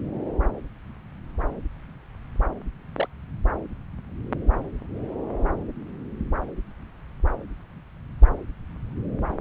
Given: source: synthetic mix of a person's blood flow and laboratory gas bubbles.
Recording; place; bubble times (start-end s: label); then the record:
Doppler ultrasound of blood flow; subclavian vein
2.97-3.08 s: bubbles
From the record:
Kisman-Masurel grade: 111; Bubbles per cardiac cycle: 1 to 2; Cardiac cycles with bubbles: 1 to 10%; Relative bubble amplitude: barely perceptible (0.100 to 0.250); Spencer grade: 1 (occasional bubble signal discernible with the cardiac motion signal, with majority of cardiac periods free of bubbles); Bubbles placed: anywhere in the cardiac cycle